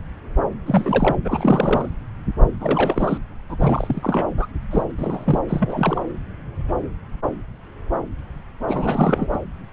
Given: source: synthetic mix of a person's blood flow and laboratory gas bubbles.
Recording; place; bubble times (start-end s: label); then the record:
Doppler ultrasound of blood flow; subclavian vein
0.66-1.17 s: bubbles
1.25-1.90 s: bubbles
2.60-3.17 s: bubbles
3.49-3.56 s: bubbles
3.59-4.26 s: bubbles
4.37-4.47 s: bubbles
4.71-4.82 s: bubbles
4.98-5.41 s: bubbles
5.49-6.01 s: bubbles
8.68-9.40 s: bubbles
From the record:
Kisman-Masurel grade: 332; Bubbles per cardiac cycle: rolling drumbeat, 9 or more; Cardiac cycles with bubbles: 50 to 99%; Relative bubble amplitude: moderate (0.250 to 0.450); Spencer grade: 3 (all of the cardiac periods contain showers or single bubble signals, but not dominating or overriding the cardiac motion signals); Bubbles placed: anywhere in the cardiac cycle